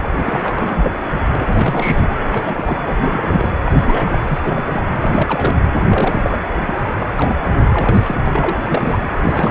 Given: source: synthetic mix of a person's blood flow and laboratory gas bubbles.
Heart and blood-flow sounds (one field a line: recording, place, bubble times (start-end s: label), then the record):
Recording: Doppler ultrasound of blood flow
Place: precordium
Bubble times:
0.01-0.11 s: bubbles
0.14-0.55 s: bubbles
0.58-0.90 s: bubbles
1.31-2.08 s: bubbles
2.29-2.95 s: bubbles
3.02-3.52 s: bubbles
3.66-4.19 s: bubbles
4.28-4.40 s: bubbles
4.42-4.84 s: bubbles
5.01-5.55 s: bubbles
5.89-6.44 s: bubbles
6.65-6.75 s: bubbles
6.99-7.14 s: bubbles
7.17-7.36 s: bubbles
7.74-8.56 s: bubbles
8.65-9.07 s: bubbles
9.12-9.51 s: bubbles
From the record:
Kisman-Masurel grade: 342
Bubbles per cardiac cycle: rolling drumbeat, 9 or more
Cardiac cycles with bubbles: 100%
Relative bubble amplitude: moderate (0.250 to 0.450)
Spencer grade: 3 (all of the cardiac periods contain showers or single bubble signals, but not dominating or overriding the cardiac motion signals)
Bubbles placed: anywhere in the cardiac cycle